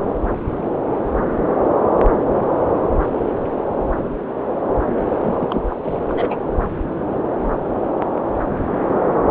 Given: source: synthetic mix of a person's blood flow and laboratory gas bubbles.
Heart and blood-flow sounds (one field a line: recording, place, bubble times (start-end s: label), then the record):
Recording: Doppler ultrasound of blood flow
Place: subclavian vein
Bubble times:
5.22-5.34 s: bubbles
5.39-5.96 s: bubbles
6.07-6.36 s: bubbles
From the record:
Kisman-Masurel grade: 222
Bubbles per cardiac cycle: several, 3 to 8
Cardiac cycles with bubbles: 10 to 50%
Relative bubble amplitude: moderate (0.250 to 0.450)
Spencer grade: 2 (many but less than half of the cardiac periods contain bubble signals, singularly or in groups)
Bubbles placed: anywhere in the cardiac cycle